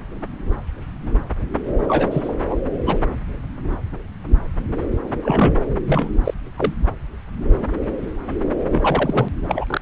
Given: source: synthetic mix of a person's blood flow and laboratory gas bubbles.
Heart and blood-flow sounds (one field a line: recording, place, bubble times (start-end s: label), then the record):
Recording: Doppler ultrasound of blood flow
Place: subclavian vein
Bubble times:
1.88-2.33 s: bubbles
2.49-2.57 s: bubbles
2.85-2.97 s: bubbles
5.22-5.61 s: bubbles
5.86-6.17 s: bubbles
6.24-6.34 s: bubbles
6.56-6.74 s: bubbles
8.71-9.29 s: bubbles
9.42-9.81 s: bubbles
From the record:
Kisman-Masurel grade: 222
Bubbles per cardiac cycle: several, 3 to 8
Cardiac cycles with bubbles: 10 to 50%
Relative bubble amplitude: moderate (0.250 to 0.450)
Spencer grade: 2 (many but less than half of the cardiac periods contain bubble signals, singularly or in groups)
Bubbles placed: anywhere in the cardiac cycle